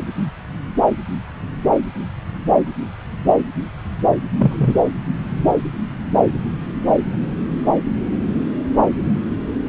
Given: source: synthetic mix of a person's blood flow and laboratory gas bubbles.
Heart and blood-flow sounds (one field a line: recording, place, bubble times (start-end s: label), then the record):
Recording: Doppler ultrasound of blood flow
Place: subclavian vein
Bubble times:
4.38-4.74 s: bubbles
From the record:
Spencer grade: 1 (occasional bubble signal discernible with the cardiac motion signal, with majority of cardiac periods free of bubbles)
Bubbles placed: anywhere in the cardiac cycle